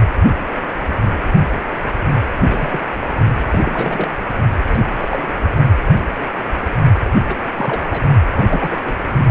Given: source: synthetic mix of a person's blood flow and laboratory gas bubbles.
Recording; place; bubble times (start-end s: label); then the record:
Doppler ultrasound of blood flow; precordium
2.45-2.81 s: bubbles
3.51-4.08 s: bubbles
4.68-4.87 s: bubbles
5.00-5.08 s: bubbles
5.11-5.33 s: bubbles
7.24-7.34 s: bubbles
7.53-8.03 s: bubbles
8.35-8.81 s: bubbles
8.84-8.99 s: bubbles
9.18-9.26 s: bubbles
From the record:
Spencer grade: 3 (all of the cardiac periods contain showers or single bubble signals, but not dominating or overriding the cardiac motion signals); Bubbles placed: only in the low amplitude regions of the cardiac cycle